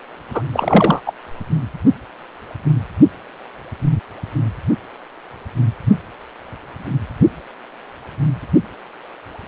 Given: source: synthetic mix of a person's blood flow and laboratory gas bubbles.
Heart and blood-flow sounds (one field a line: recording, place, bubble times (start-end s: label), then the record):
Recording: Doppler ultrasound of blood flow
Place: precordium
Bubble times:
0.33-0.43 s: bubbles
0.53-1.00 s: bubbles
1.06-1.12 s: bubbles
From the record:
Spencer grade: 1 (occasional bubble signal discernible with the cardiac motion signal, with majority of cardiac periods free of bubbles)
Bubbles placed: only in the low amplitude regions of the cardiac cycle